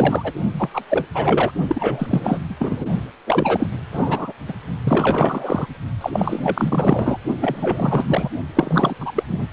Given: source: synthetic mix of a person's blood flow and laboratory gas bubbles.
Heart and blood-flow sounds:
Doppler ultrasound of blood flow; precordium
0.00-0.33 s: bubbles
0.57-0.69 s: bubbles
0.73-0.84 s: bubbles
0.90-1.06 s: bubbles
1.14-1.51 s: bubbles
1.68-2.39 s: bubbles
2.49-2.55 s: bubbles
2.59-2.88 s: bubbles
3.26-3.67 s: bubbles
3.92-4.33 s: bubbles
4.48-4.53 s: bubbles
4.84-5.66 s: bubbles
6.00-6.10 s: bubbles
6.12-7.19 s: bubbles
7.41-8.29 s: bubbles
8.54-8.95 s: bubbles
8.99-9.11 s: bubbles
9.15-9.23 s: bubbles
9.27-9.48 s: bubbles
From the record:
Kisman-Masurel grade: 444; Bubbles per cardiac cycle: continuous sound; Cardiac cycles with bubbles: 100%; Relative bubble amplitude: maximal (0.775 to 0.999); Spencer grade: 4 (maximum detectable bubble signal sounding continuously throughout systole and diastole of every cardiac period, and overriding the amplitude of the normal cardiac signals); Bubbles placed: only in the low amplitude regions of the cardiac cycle

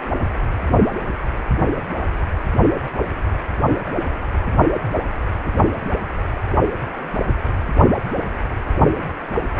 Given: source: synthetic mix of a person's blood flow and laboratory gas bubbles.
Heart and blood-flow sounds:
Doppler ultrasound of blood flow; precordium
4.74-4.80 s: bubbles
5.45-5.50 s: bubbles
From the record:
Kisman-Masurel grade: 111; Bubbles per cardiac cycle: 1 to 2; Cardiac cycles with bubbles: 1 to 10%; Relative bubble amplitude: barely perceptible (0.100 to 0.250); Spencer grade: 1 (occasional bubble signal discernible with the cardiac motion signal, with majority of cardiac periods free of bubbles); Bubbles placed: only in the low amplitude regions of the cardiac cycle

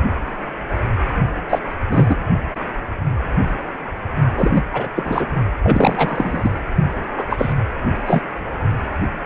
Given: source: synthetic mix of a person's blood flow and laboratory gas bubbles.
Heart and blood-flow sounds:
Doppler ultrasound of blood flow; precordium
1.50-1.59 s: bubbles
1.89-2.16 s: bubbles
4.38-4.62 s: bubbles
4.73-4.88 s: bubbles
4.96-5.28 s: bubbles
5.62-6.62 s: bubbles
7.17-7.25 s: bubbles
7.29-7.53 s: bubbles
8.05-8.23 s: bubbles
From the record:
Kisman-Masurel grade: 233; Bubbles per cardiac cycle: several, 3 to 8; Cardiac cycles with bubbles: 50 to 99%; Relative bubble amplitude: loud (0.450 to 0.775); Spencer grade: 3 (all of the cardiac periods contain showers or single bubble signals, but not dominating or overriding the cardiac motion signals); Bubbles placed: only in the low amplitude regions of the cardiac cycle

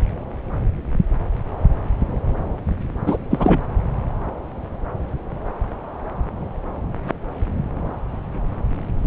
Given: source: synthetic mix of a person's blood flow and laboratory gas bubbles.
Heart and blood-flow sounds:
Doppler ultrasound of blood flow; subclavian vein
3.06-3.17 s: bubbles
3.31-3.62 s: bubbles
From the record:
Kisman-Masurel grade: 213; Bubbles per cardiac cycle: several, 3 to 8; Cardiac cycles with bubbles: 1 to 10%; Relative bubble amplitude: loud (0.450 to 0.775); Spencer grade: 1 (occasional bubble signal discernible with the cardiac motion signal, with majority of cardiac periods free of bubbles); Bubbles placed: anywhere in the cardiac cycle

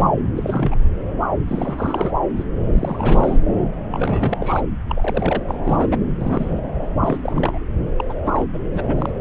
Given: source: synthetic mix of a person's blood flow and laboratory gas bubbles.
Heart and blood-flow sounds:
Doppler ultrasound of blood flow; subclavian vein
0.00-0.03 s: bubbles
0.36-0.76 s: bubbles
1.48-2.11 s: bubbles
2.36-2.44 s: bubbles
2.74-3.40 s: bubbles
3.91-4.62 s: bubbles
4.88-5.43 s: bubbles
5.48-5.60 s: bubbles
5.64-6.03 s: bubbles
6.16-6.62 s: bubbles
6.79-6.87 s: bubbles
7.01-7.18 s: bubbles
7.21-7.58 s: bubbles
7.98-8.04 s: bubbles
8.09-8.13 s: bubbles
8.25-8.46 s: bubbles
8.54-8.58 s: bubbles
8.73-8.85 s: bubbles
8.88-9.10 s: bubbles
From the record:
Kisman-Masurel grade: 332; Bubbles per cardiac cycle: rolling drumbeat, 9 or more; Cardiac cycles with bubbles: 50 to 99%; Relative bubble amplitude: moderate (0.250 to 0.450); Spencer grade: 3 (all of the cardiac periods contain showers or single bubble signals, but not dominating or overriding the cardiac motion signals); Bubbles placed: anywhere in the cardiac cycle

